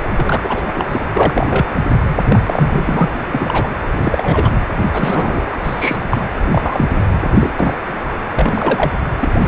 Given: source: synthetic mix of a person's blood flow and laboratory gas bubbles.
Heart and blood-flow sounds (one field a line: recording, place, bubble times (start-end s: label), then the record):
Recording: Doppler ultrasound of blood flow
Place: precordium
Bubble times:
0.15-0.64 s: bubbles
0.67-0.86 s: bubbles
0.89-1.00 s: bubbles
1.12-1.66 s: bubbles
2.08-2.16 s: bubbles
2.28-3.09 s: bubbles
3.13-3.18 s: bubbles
3.32-3.70 s: bubbles
4.01-4.50 s: bubbles
4.93-5.56 s: bubbles
5.63-5.98 s: bubbles
6.11-6.21 s: bubbles
6.51-6.84 s: bubbles
7.37-7.51 s: bubbles
7.54-7.96 s: bubbles
8.38-8.92 s: bubbles
9.21-9.29 s: bubbles
9.39-9.48 s: bubbles
From the record:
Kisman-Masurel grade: 243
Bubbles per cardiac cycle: several, 3 to 8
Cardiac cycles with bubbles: 100%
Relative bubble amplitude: loud (0.450 to 0.775)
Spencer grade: 3 (all of the cardiac periods contain showers or single bubble signals, but not dominating or overriding the cardiac motion signals)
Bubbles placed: anywhere in the cardiac cycle